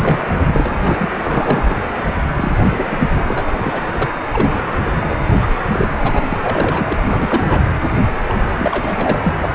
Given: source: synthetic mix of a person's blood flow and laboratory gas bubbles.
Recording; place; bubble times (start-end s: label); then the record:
Doppler ultrasound of blood flow; precordium
0.00-0.19 s: bubbles
0.44-1.09 s: bubbles
1.20-1.79 s: bubbles
2.37-2.58 s: bubbles
2.63-3.08 s: bubbles
3.15-3.44 s: bubbles
3.46-3.52 s: bubbles
3.64-3.89 s: bubbles
3.93-4.12 s: bubbles
4.33-4.70 s: bubbles
4.95-5.19 s: bubbles
5.29-5.46 s: bubbles
5.71-6.28 s: bubbles
6.32-6.96 s: bubbles
7.07-7.66 s: bubbles
8.29-8.35 s: bubbles
8.51-8.55 s: bubbles
8.57-9.20 s: bubbles
9.24-9.34 s: bubbles
9.41-9.55 s: bubbles
From the record:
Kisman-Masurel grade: 342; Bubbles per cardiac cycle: rolling drumbeat, 9 or more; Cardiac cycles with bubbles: 100%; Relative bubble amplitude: moderate (0.250 to 0.450); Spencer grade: 3 (all of the cardiac periods contain showers or single bubble signals, but not dominating or overriding the cardiac motion signals); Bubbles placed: anywhere in the cardiac cycle